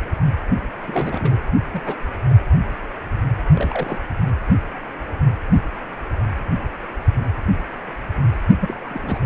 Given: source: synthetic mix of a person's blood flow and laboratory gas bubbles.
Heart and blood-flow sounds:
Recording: Doppler ultrasound of blood flow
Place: precordium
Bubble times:
0.88-1.40 s: bubbles
1.74-1.80 s: bubbles
1.85-1.96 s: bubbles
2.29-2.33 s: bubbles
3.54-3.98 s: bubbles
8.61-8.76 s: bubbles
8.86-9.20 s: bubbles
From the record:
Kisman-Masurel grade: 221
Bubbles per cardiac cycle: several, 3 to 8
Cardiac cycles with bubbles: 10 to 50%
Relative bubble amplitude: barely perceptible (0.100 to 0.250)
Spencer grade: 2 (many but less than half of the cardiac periods contain bubble signals, singularly or in groups)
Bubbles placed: anywhere in the cardiac cycle

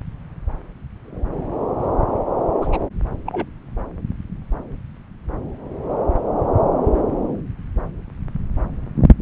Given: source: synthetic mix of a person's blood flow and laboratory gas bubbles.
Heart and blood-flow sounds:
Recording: Doppler ultrasound of blood flow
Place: subclavian vein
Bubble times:
2.62-2.68 s: bubbles
2.72-2.77 s: bubbles
3.26-3.46 s: bubbles
From the record:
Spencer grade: 1 (occasional bubble signal discernible with the cardiac motion signal, with majority of cardiac periods free of bubbles)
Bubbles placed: anywhere in the cardiac cycle

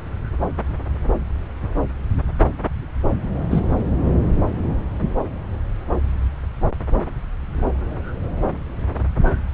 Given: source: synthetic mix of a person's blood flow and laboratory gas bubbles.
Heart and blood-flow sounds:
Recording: Doppler ultrasound of blood flow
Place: subclavian vein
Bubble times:
3.50-3.60 s: bubbles
4.03-4.12 s: bubbles
From the record:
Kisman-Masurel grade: 112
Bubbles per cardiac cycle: 1 to 2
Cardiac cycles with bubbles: 1 to 10%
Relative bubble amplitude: moderate (0.250 to 0.450)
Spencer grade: 1 (occasional bubble signal discernible with the cardiac motion signal, with majority of cardiac periods free of bubbles)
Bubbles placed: anywhere in the cardiac cycle

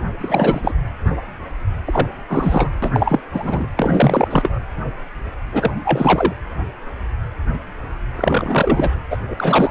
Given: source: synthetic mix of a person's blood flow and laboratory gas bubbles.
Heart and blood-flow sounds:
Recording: Doppler ultrasound of blood flow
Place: precordium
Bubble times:
0.19-0.72 s: bubbles
1.85-2.08 s: bubbles
2.29-2.70 s: bubbles
2.82-3.21 s: bubbles
3.33-3.66 s: bubbles
3.76-4.60 s: bubbles
5.52-5.71 s: bubbles
5.83-6.33 s: bubbles
8.15-8.90 s: bubbles
9.10-9.18 s: bubbles
9.30-9.70 s: bubbles
From the record:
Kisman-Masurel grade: 333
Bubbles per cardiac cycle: rolling drumbeat, 9 or more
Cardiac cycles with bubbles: 50 to 99%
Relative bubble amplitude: loud (0.450 to 0.775)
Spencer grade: 3 (all of the cardiac periods contain showers or single bubble signals, but not dominating or overriding the cardiac motion signals)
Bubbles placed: anywhere in the cardiac cycle

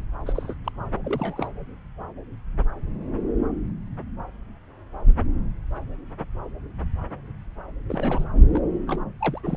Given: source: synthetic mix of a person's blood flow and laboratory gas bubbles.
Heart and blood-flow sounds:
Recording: Doppler ultrasound of blood flow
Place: subclavian vein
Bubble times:
0.26-0.54 s: bubbles
0.65-0.70 s: bubbles
1.04-1.48 s: bubbles
7.89-8.24 s: bubbles
8.35-8.40 s: bubbles
8.47-8.60 s: bubbles
8.87-9.02 s: bubbles
9.19-9.39 s: bubbles
9.43-9.57 s: bubbles
From the record:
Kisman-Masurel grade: 221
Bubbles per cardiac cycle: several, 3 to 8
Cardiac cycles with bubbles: 10 to 50%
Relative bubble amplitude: barely perceptible (0.100 to 0.250)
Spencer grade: 2 (many but less than half of the cardiac periods contain bubble signals, singularly or in groups)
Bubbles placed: anywhere in the cardiac cycle

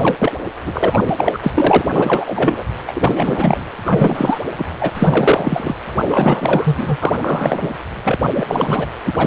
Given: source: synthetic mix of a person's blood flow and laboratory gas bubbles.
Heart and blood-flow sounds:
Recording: Doppler ultrasound of blood flow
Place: precordium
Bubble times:
0.00-0.15 s: bubbles
0.19-0.32 s: bubbles
0.65-0.98 s: bubbles
1.09-1.14 s: bubbles
1.17-1.39 s: bubbles
1.43-1.84 s: bubbles
1.96-2.64 s: bubbles
2.87-3.64 s: bubbles
3.85-4.39 s: bubbles
4.57-4.66 s: bubbles
4.80-4.91 s: bubbles
4.94-5.76 s: bubbles
6.00-6.97 s: bubbles
7.01-7.12 s: bubbles
7.21-7.68 s: bubbles
8.04-8.18 s: bubbles
8.36-8.87 s: bubbles
9.05-9.27 s: bubbles
From the record:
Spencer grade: 3 (all of the cardiac periods contain showers or single bubble signals, but not dominating or overriding the cardiac motion signals)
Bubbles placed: anywhere in the cardiac cycle

